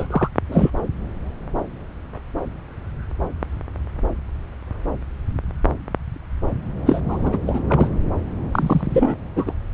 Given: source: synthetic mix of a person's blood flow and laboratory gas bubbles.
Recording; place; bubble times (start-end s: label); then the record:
Doppler ultrasound of blood flow; subclavian vein
0.00-0.07 s: bubbles
0.10-0.28 s: bubbles
0.48-0.71 s: bubbles
6.85-7.01 s: bubbles
7.08-7.38 s: bubbles
7.46-7.62 s: bubbles
7.69-7.89 s: bubbles
8.52-9.15 s: bubbles
9.36-9.54 s: bubbles
From the record:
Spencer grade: 2 (many but less than half of the cardiac periods contain bubble signals, singularly or in groups); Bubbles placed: anywhere in the cardiac cycle